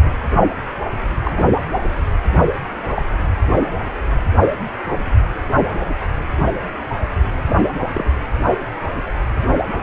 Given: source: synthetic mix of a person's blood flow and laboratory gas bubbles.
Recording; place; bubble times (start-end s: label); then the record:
Doppler ultrasound of blood flow; precordium
1.24-1.33 s: bubbles
1.36-1.46 s: bubbles
2.94-3.02 s: bubbles
7.46-7.56 s: bubbles
7.93-8.09 s: bubbles
From the record:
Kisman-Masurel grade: 122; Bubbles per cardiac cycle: 1 to 2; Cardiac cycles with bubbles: 10 to 50%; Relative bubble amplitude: moderate (0.250 to 0.450); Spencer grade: 2 (many but less than half of the cardiac periods contain bubble signals, singularly or in groups); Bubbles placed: anywhere in the cardiac cycle